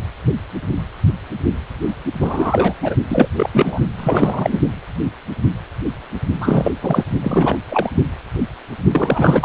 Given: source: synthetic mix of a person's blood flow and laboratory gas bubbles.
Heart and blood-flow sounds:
Doppler ultrasound of blood flow; precordium
2.21-2.74 s: bubbles
2.82-2.95 s: bubbles
3.08-3.28 s: bubbles
3.36-3.79 s: bubbles
3.97-4.59 s: bubbles
6.40-6.71 s: bubbles
6.82-7.05 s: bubbles
7.24-7.58 s: bubbles
7.70-7.90 s: bubbles
8.92-9.45 s: bubbles
From the record:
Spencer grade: 3 (all of the cardiac periods contain showers or single bubble signals, but not dominating or overriding the cardiac motion signals); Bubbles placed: only in the low amplitude regions of the cardiac cycle

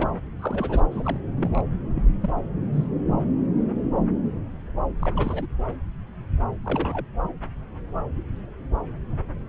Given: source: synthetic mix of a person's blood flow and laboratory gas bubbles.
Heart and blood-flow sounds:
Doppler ultrasound of blood flow; subclavian vein
0.00-0.10 s: bubbles
0.38-0.80 s: bubbles
0.91-1.17 s: bubbles
1.37-1.61 s: bubbles
1.94-2.02 s: bubbles
2.21-2.29 s: bubbles
2.72-2.87 s: bubbles
4.99-5.46 s: bubbles
5.67-5.73 s: bubbles
6.64-7.06 s: bubbles
From the record:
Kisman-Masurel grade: 221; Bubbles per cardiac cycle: several, 3 to 8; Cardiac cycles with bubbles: 10 to 50%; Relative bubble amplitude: barely perceptible (0.100 to 0.250); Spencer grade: 2 (many but less than half of the cardiac periods contain bubble signals, singularly or in groups); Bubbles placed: anywhere in the cardiac cycle

